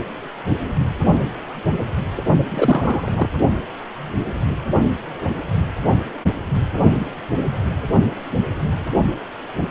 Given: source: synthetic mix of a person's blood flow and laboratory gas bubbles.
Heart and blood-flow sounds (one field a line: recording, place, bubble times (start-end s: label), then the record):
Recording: Doppler ultrasound of blood flow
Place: precordium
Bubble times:
2.49-3.12 s: bubbles
3.16-3.29 s: bubbles
From the record:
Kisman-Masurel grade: 213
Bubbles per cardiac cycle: several, 3 to 8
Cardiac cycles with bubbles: 1 to 10%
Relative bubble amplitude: loud (0.450 to 0.775)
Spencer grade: 1 (occasional bubble signal discernible with the cardiac motion signal, with majority of cardiac periods free of bubbles)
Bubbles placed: only in the low amplitude regions of the cardiac cycle